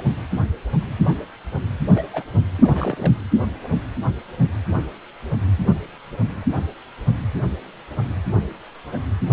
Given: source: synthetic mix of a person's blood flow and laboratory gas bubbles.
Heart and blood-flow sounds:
Doppler ultrasound of blood flow; precordium
1.95-2.05 s: bubbles
2.13-2.23 s: bubbles
2.58-3.13 s: bubbles
From the record:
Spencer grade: 2 (many but less than half of the cardiac periods contain bubble signals, singularly or in groups); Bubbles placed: anywhere in the cardiac cycle

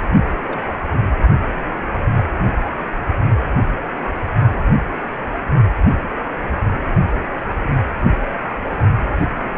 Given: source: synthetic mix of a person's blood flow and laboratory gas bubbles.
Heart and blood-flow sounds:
Doppler ultrasound of blood flow; precordium
0.47-0.60 s: bubbles
From the record:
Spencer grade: 2 (many but less than half of the cardiac periods contain bubble signals, singularly or in groups); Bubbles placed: only in the low amplitude regions of the cardiac cycle

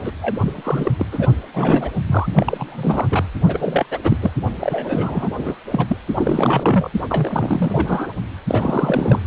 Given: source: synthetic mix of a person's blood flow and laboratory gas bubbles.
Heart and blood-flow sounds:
Doppler ultrasound of blood flow; precordium
0.04-0.11 s: bubbles
0.22-0.91 s: bubbles
0.98-1.05 s: bubbles
1.11-1.26 s: bubbles
1.53-1.90 s: bubbles
2.07-2.27 s: bubbles
2.35-3.07 s: bubbles
3.10-3.24 s: bubbles
3.43-3.86 s: bubbles
3.91-3.99 s: bubbles
4.04-4.17 s: bubbles
4.22-4.31 s: bubbles
4.61-5.29 s: bubbles
5.38-5.54 s: bubbles
5.71-5.84 s: bubbles
5.87-5.97 s: bubbles
6.15-6.90 s: bubbles
7.09-8.13 s: bubbles
8.48-9.20 s: bubbles
From the record:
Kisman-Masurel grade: 342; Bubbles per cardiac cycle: rolling drumbeat, 9 or more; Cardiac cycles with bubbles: 100%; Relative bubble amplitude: moderate (0.250 to 0.450); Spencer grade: 3 (all of the cardiac periods contain showers or single bubble signals, but not dominating or overriding the cardiac motion signals); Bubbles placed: anywhere in the cardiac cycle

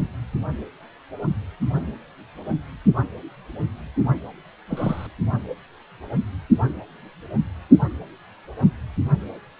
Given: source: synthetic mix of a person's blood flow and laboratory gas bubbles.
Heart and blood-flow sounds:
Doppler ultrasound of blood flow; precordium
4.68-5.07 s: bubbles
From the record:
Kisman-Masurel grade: 211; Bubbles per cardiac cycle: several, 3 to 8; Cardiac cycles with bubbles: 1 to 10%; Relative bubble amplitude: barely perceptible (0.100 to 0.250); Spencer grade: 1 (occasional bubble signal discernible with the cardiac motion signal, with majority of cardiac periods free of bubbles); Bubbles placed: only in the low amplitude regions of the cardiac cycle

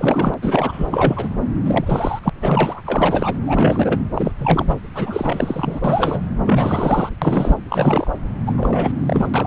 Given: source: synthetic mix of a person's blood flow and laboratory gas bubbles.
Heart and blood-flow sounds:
Doppler ultrasound of blood flow; subclavian vein
0.00-0.34 s: bubbles
0.42-1.29 s: bubbles
1.65-2.20 s: bubbles
2.23-2.29 s: bubbles
2.35-2.81 s: bubbles
2.87-3.34 s: bubbles
3.46-4.02 s: bubbles
4.14-4.32 s: bubbles
4.39-4.77 s: bubbles
4.95-5.80 s: bubbles
5.84-6.21 s: bubbles
6.45-7.10 s: bubbles
7.21-7.56 s: bubbles
7.68-8.10 s: bubbles
8.46-8.55 s: bubbles
8.57-8.91 s: bubbles
8.96-9.27 s: bubbles
9.33-9.47 s: bubbles
From the record:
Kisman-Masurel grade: 342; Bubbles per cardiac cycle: rolling drumbeat, 9 or more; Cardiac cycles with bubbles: 100%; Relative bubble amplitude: moderate (0.250 to 0.450); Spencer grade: 3 (all of the cardiac periods contain showers or single bubble signals, but not dominating or overriding the cardiac motion signals); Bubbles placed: anywhere in the cardiac cycle

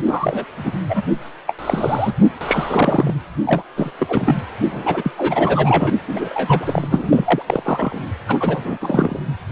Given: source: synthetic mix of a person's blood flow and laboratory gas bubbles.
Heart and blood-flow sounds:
Doppler ultrasound of blood flow; precordium
0.05-0.45 s: bubbles
0.57-0.75 s: bubbles
0.89-1.01 s: bubbles
1.47-1.53 s: bubbles
1.58-2.14 s: bubbles
2.21-2.32 s: bubbles
2.41-3.15 s: bubbles
3.45-3.63 s: bubbles
3.76-3.92 s: bubbles
3.99-4.42 s: bubbles
4.64-5.12 s: bubbles
5.17-5.90 s: bubbles
6.08-6.88 s: bubbles
6.90-7.42 s: bubbles
7.46-7.98 s: bubbles
8.28-8.78 s: bubbles
8.80-9.20 s: bubbles
From the record:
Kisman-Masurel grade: 342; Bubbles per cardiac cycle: rolling drumbeat, 9 or more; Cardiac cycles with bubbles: 100%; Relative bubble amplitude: moderate (0.250 to 0.450); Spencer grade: 3 (all of the cardiac periods contain showers or single bubble signals, but not dominating or overriding the cardiac motion signals); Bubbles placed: anywhere in the cardiac cycle

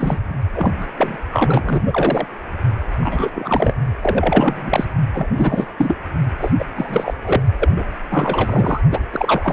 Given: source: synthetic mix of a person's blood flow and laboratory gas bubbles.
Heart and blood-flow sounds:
Doppler ultrasound of blood flow; precordium
0.00-0.19 s: bubbles
0.53-0.86 s: bubbles
0.96-1.18 s: bubbles
1.31-1.83 s: bubbles
1.86-2.26 s: bubbles
3.00-3.31 s: bubbles
3.35-3.73 s: bubbles
4.02-4.85 s: bubbles
5.13-5.27 s: bubbles
5.35-5.67 s: bubbles
5.77-5.96 s: bubbles
6.38-6.51 s: bubbles
6.58-6.65 s: bubbles
6.75-7.14 s: bubbles
7.21-7.41 s: bubbles
7.59-7.72 s: bubbles
7.76-7.84 s: bubbles
8.11-8.81 s: bubbles
8.91-8.99 s: bubbles
9.12-9.53 s: bubbles
From the record:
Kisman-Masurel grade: 343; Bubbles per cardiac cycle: rolling drumbeat, 9 or more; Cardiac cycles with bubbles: 100%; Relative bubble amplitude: loud (0.450 to 0.775); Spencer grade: 3 (all of the cardiac periods contain showers or single bubble signals, but not dominating or overriding the cardiac motion signals); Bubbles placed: only in the low amplitude regions of the cardiac cycle

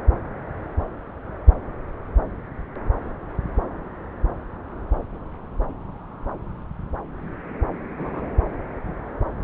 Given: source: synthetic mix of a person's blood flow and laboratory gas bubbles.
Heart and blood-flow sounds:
Doppler ultrasound of blood flow; subclavian vein
7.97-8.29 s: bubbles
From the record:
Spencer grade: 1 (occasional bubble signal discernible with the cardiac motion signal, with majority of cardiac periods free of bubbles); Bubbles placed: anywhere in the cardiac cycle

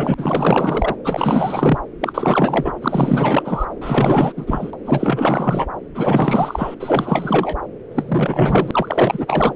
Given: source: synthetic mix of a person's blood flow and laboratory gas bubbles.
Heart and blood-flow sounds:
Doppler ultrasound of blood flow; subclavian vein
0.00-0.14 s: bubbles
0.17-0.96 s: bubbles
1.04-1.78 s: bubbles
2.00-2.75 s: bubbles
2.81-3.66 s: bubbles
3.81-4.33 s: bubbles
4.36-4.71 s: bubbles
4.85-5.67 s: bubbles
5.95-6.75 s: bubbles
6.79-7.57 s: bubbles
7.92-9.53 s: bubbles
From the record:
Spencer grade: 4 (maximum detectable bubble signal sounding continuously throughout systole and diastole of every cardiac period, and overriding the amplitude of the normal cardiac signals); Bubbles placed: anywhere in the cardiac cycle

